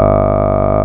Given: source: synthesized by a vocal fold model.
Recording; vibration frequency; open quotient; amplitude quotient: sustained vowel; 50 Hz; 0.4; 1.4